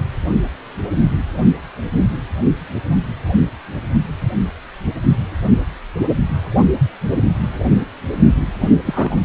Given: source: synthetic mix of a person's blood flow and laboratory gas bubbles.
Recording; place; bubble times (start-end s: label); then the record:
Doppler ultrasound of blood flow; precordium
8.61-8.70 s: bubbles
8.85-9.16 s: bubbles
From the record:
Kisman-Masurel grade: 212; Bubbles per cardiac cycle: several, 3 to 8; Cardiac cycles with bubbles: 1 to 10%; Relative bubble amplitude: moderate (0.250 to 0.450); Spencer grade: 1 (occasional bubble signal discernible with the cardiac motion signal, with majority of cardiac periods free of bubbles); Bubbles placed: anywhere in the cardiac cycle